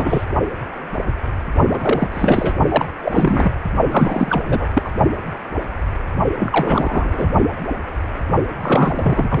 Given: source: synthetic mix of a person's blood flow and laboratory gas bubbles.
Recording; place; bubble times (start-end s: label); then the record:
Doppler ultrasound of blood flow; precordium
0.00-0.25 s: bubbles
1.69-2.56 s: bubbles
2.68-2.86 s: bubbles
3.02-3.51 s: bubbles
3.88-4.42 s: bubbles
4.46-4.66 s: bubbles
4.73-4.91 s: bubbles
6.37-7.29 s: bubbles
8.61-9.40 s: bubbles
From the record:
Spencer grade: 3 (all of the cardiac periods contain showers or single bubble signals, but not dominating or overriding the cardiac motion signals); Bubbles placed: only in the low amplitude regions of the cardiac cycle